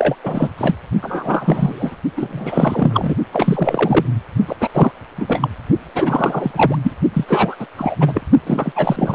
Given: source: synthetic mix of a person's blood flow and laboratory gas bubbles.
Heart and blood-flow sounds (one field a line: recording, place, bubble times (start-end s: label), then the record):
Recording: Doppler ultrasound of blood flow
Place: precordium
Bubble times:
0.00-0.15 s: bubbles
0.23-0.50 s: bubbles
0.57-0.76 s: bubbles
1.02-1.97 s: bubbles
2.17-3.15 s: bubbles
3.33-4.05 s: bubbles
4.46-4.56 s: bubbles
4.60-4.68 s: bubbles
4.74-4.92 s: bubbles
5.17-5.48 s: bubbles
5.95-6.76 s: bubbles
6.83-6.91 s: bubbles
7.14-7.25 s: bubbles
7.28-7.55 s: bubbles
7.59-7.67 s: bubbles
7.76-7.95 s: bubbles
8.00-8.22 s: bubbles
8.46-8.72 s: bubbles
8.75-9.14 s: bubbles
From the record:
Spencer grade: 3 (all of the cardiac periods contain showers or single bubble signals, but not dominating or overriding the cardiac motion signals)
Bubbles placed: only in the low amplitude regions of the cardiac cycle